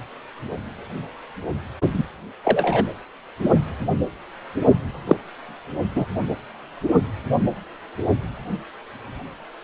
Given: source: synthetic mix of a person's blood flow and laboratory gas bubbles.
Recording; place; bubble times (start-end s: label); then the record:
Doppler ultrasound of blood flow; precordium
1.94-2.04 s: bubbles
2.44-2.85 s: bubbles
5.07-5.17 s: bubbles
5.96-6.05 s: bubbles
From the record:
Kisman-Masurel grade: 123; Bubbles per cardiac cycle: 1 to 2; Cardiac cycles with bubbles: 10 to 50%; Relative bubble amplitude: loud (0.450 to 0.775); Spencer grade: 2 (many but less than half of the cardiac periods contain bubble signals, singularly or in groups); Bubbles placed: anywhere in the cardiac cycle